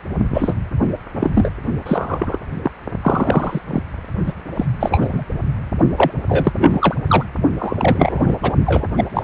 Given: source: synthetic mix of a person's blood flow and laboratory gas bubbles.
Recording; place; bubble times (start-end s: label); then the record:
Doppler ultrasound of blood flow; precordium
0.33-0.54 s: bubbles
1.19-1.31 s: bubbles
1.35-1.50 s: bubbles
1.85-2.39 s: bubbles
2.64-2.72 s: bubbles
3.02-3.61 s: bubbles
3.68-3.82 s: bubbles
4.26-4.33 s: bubbles
4.55-4.65 s: bubbles
4.79-5.08 s: bubbles
5.12-5.24 s: bubbles
5.96-6.11 s: bubbles
6.28-6.52 s: bubbles
6.58-6.95 s: bubbles
7.07-7.25 s: bubbles
7.58-8.36 s: bubbles
8.42-8.54 s: bubbles
8.65-8.88 s: bubbles
8.97-9.04 s: bubbles
9.14-9.22 s: bubbles
From the record:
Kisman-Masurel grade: 243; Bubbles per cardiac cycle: several, 3 to 8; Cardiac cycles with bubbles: 100%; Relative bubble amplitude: loud (0.450 to 0.775); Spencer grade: 3 (all of the cardiac periods contain showers or single bubble signals, but not dominating or overriding the cardiac motion signals); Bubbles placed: only in the low amplitude regions of the cardiac cycle